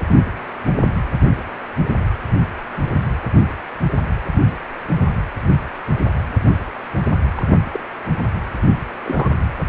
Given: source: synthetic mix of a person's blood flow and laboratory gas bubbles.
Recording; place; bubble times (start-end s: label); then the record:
Doppler ultrasound of blood flow; precordium
7.36-7.58 s: bubbles
7.71-7.80 s: bubbles
9.04-9.31 s: bubbles
From the record:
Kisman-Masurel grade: 121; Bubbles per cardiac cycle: 1 to 2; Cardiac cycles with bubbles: 10 to 50%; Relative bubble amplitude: barely perceptible (0.100 to 0.250); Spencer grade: 2 (many but less than half of the cardiac periods contain bubble signals, singularly or in groups); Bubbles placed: anywhere in the cardiac cycle